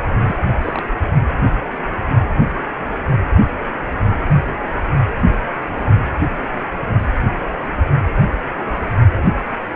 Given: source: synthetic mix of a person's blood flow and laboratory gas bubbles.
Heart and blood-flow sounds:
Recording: Doppler ultrasound of blood flow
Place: precordium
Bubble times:
0.27-0.36 s: bubbles
0.61-0.86 s: bubbles
From the record:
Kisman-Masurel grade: 211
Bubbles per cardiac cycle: several, 3 to 8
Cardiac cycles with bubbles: 1 to 10%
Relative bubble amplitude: barely perceptible (0.100 to 0.250)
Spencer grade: 1 (occasional bubble signal discernible with the cardiac motion signal, with majority of cardiac periods free of bubbles)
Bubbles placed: only in the low amplitude regions of the cardiac cycle

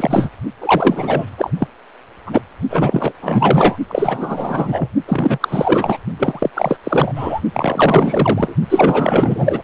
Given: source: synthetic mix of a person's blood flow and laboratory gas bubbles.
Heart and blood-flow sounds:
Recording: Doppler ultrasound of blood flow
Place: precordium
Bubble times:
0.00-0.29 s: bubbles
0.60-1.26 s: bubbles
1.38-1.52 s: bubbles
1.59-1.68 s: bubbles
2.26-2.42 s: bubbles
2.70-3.12 s: bubbles
3.21-3.77 s: bubbles
3.88-4.90 s: bubbles
5.06-5.38 s: bubbles
5.40-5.97 s: bubbles
6.18-6.50 s: bubbles
6.54-6.79 s: bubbles
6.83-7.13 s: bubbles
7.15-7.41 s: bubbles
7.54-8.56 s: bubbles
8.70-9.62 s: bubbles
From the record:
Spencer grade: 4 (maximum detectable bubble signal sounding continuously throughout systole and diastole of every cardiac period, and overriding the amplitude of the normal cardiac signals)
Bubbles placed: only in the low amplitude regions of the cardiac cycle

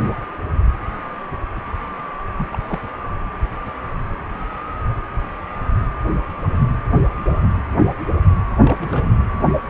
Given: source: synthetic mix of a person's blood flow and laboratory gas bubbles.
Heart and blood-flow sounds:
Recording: Doppler ultrasound of blood flow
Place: precordium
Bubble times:
2.36-2.48 s: bubbles
2.51-2.79 s: bubbles
8.61-9.12 s: bubbles
From the record:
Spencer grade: 2 (many but less than half of the cardiac periods contain bubble signals, singularly or in groups)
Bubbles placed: anywhere in the cardiac cycle

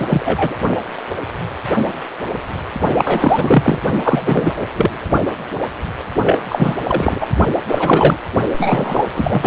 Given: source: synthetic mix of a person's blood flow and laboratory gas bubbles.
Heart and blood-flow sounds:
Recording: Doppler ultrasound of blood flow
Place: precordium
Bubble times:
0.00-0.56 s: bubbles
2.94-3.79 s: bubbles
4.04-4.57 s: bubbles
4.62-4.67 s: bubbles
4.77-4.92 s: bubbles
6.25-6.39 s: bubbles
6.49-6.75 s: bubbles
6.83-7.27 s: bubbles
7.68-8.17 s: bubbles
8.56-9.07 s: bubbles
9.14-9.47 s: bubbles
From the record:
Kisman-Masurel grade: 333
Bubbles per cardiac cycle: rolling drumbeat, 9 or more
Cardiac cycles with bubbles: 50 to 99%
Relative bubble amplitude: loud (0.450 to 0.775)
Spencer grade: 3 (all of the cardiac periods contain showers or single bubble signals, but not dominating or overriding the cardiac motion signals)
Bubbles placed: only in the low amplitude regions of the cardiac cycle

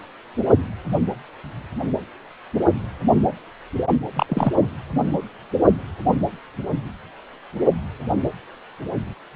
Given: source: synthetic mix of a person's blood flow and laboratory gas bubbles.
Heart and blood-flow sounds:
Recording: Doppler ultrasound of blood flow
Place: precordium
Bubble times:
4.16-4.26 s: bubbles
4.29-4.52 s: bubbles
4.56-4.67 s: bubbles
From the record:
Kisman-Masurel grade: 212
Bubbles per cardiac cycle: several, 3 to 8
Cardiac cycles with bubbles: 1 to 10%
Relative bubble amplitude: moderate (0.250 to 0.450)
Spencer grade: 1 (occasional bubble signal discernible with the cardiac motion signal, with majority of cardiac periods free of bubbles)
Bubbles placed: anywhere in the cardiac cycle

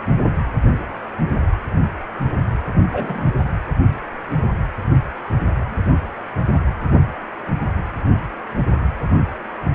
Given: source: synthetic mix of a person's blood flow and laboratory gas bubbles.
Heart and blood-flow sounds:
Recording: Doppler ultrasound of blood flow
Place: precordium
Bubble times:
2.92-3.31 s: bubbles
From the record:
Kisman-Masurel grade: 112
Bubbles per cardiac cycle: 1 to 2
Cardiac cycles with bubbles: 1 to 10%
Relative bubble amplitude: moderate (0.250 to 0.450)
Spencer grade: 1 (occasional bubble signal discernible with the cardiac motion signal, with majority of cardiac periods free of bubbles)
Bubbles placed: anywhere in the cardiac cycle

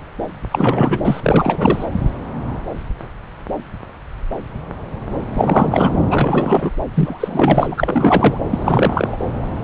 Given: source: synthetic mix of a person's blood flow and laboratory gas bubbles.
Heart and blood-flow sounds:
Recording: Doppler ultrasound of blood flow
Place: subclavian vein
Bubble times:
0.51-1.85 s: bubbles
5.33-5.93 s: bubbles
6.11-6.71 s: bubbles
6.94-7.74 s: bubbles
7.77-8.38 s: bubbles
8.49-9.17 s: bubbles
From the record:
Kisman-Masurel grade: 333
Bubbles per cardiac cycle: rolling drumbeat, 9 or more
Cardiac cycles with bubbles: 50 to 99%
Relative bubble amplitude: loud (0.450 to 0.775)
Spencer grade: 3 (all of the cardiac periods contain showers or single bubble signals, but not dominating or overriding the cardiac motion signals)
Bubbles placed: anywhere in the cardiac cycle

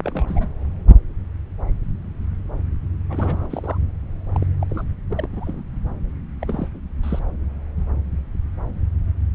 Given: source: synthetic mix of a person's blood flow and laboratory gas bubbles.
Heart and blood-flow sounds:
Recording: Doppler ultrasound of blood flow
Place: subclavian vein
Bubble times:
0.04-0.46 s: bubbles
3.08-3.77 s: bubbles
4.34-4.47 s: bubbles
4.62-4.65 s: bubbles
4.69-4.84 s: bubbles
5.09-5.28 s: bubbles
5.32-5.62 s: bubbles
6.41-6.69 s: bubbles
7.03-7.20 s: bubbles
From the record:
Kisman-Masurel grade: 221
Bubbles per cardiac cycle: several, 3 to 8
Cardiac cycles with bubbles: 10 to 50%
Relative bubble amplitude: barely perceptible (0.100 to 0.250)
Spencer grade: 2 (many but less than half of the cardiac periods contain bubble signals, singularly or in groups)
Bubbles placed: anywhere in the cardiac cycle

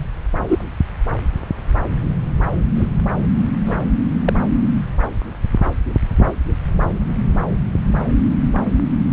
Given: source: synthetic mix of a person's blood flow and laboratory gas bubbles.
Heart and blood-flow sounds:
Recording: Doppler ultrasound of blood flow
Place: subclavian vein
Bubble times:
0.48-0.65 s: bubbles
2.75-2.88 s: bubbles
3.66-3.77 s: bubbles
4.27-4.33 s: bubbles
From the record:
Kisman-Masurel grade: 122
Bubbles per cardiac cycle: 1 to 2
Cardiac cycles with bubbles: 10 to 50%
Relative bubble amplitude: moderate (0.250 to 0.450)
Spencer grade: 2 (many but less than half of the cardiac periods contain bubble signals, singularly or in groups)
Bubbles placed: anywhere in the cardiac cycle

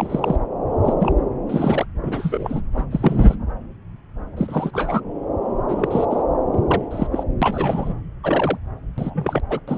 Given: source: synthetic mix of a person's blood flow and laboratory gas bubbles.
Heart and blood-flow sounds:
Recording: Doppler ultrasound of blood flow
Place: subclavian vein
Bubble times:
0.00-0.36 s: bubbles
0.83-0.95 s: bubbles
0.99-1.14 s: bubbles
1.45-1.85 s: bubbles
2.02-2.62 s: bubbles
2.74-2.88 s: bubbles
2.91-3.36 s: bubbles
4.36-4.70 s: bubbles
4.73-5.00 s: bubbles
5.68-6.05 s: bubbles
6.10-6.22 s: bubbles
6.51-6.87 s: bubbles
6.90-7.07 s: bubbles
7.11-7.23 s: bubbles
7.42-7.93 s: bubbles
8.24-8.58 s: bubbles
8.97-9.41 s: bubbles
9.49-9.60 s: bubbles
9.68-9.78 s: bubbles
From the record:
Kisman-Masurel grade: 232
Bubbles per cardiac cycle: several, 3 to 8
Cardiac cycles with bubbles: 50 to 99%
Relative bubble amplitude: moderate (0.250 to 0.450)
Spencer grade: 3 (all of the cardiac periods contain showers or single bubble signals, but not dominating or overriding the cardiac motion signals)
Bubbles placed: anywhere in the cardiac cycle

